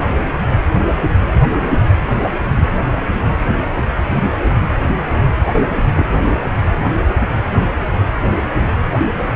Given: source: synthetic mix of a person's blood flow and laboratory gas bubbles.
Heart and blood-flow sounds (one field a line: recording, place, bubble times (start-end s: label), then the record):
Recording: Doppler ultrasound of blood flow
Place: precordium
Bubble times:
5.54-5.63 s: bubbles
5.93-6.07 s: bubbles
From the record:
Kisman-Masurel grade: 112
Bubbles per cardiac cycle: 1 to 2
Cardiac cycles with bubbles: 1 to 10%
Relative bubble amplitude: moderate (0.250 to 0.450)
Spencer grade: 1 (occasional bubble signal discernible with the cardiac motion signal, with majority of cardiac periods free of bubbles)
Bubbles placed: anywhere in the cardiac cycle